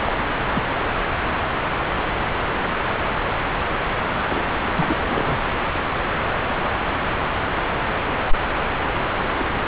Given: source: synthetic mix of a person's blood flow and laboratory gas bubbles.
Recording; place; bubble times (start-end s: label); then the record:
Doppler ultrasound of blood flow; subclavian vein
0.05-0.13 s: bubbles
0.54-0.62 s: bubbles
4.29-4.42 s: bubbles
4.61-4.68 s: bubbles
4.75-5.38 s: bubbles
9.38-9.48 s: bubbles
9.53-9.59 s: bubbles
From the record:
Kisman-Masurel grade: 221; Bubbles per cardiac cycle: several, 3 to 8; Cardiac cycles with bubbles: 10 to 50%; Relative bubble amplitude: barely perceptible (0.100 to 0.250); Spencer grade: 2 (many but less than half of the cardiac periods contain bubble signals, singularly or in groups); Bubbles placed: anywhere in the cardiac cycle